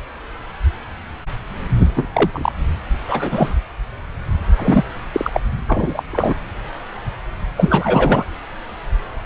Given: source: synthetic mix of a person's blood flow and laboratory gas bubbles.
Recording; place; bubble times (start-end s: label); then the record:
Doppler ultrasound of blood flow; subclavian vein
1.76-1.87 s: bubbles
1.96-2.08 s: bubbles
2.13-2.52 s: bubbles
3.06-3.54 s: bubbles
4.56-4.83 s: bubbles
5.12-5.30 s: bubbles
5.33-5.40 s: bubbles
5.67-6.02 s: bubbles
6.12-6.34 s: bubbles
7.56-8.25 s: bubbles
From the record:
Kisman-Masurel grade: 233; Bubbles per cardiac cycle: several, 3 to 8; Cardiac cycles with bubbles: 50 to 99%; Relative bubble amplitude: loud (0.450 to 0.775); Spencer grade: 3 (all of the cardiac periods contain showers or single bubble signals, but not dominating or overriding the cardiac motion signals); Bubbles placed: anywhere in the cardiac cycle